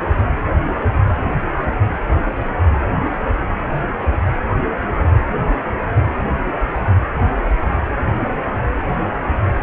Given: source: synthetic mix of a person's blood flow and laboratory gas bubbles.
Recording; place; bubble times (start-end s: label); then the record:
Doppler ultrasound of blood flow; precordium
no bubbles
From the record:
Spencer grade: 0 (complete lack of bubble signals)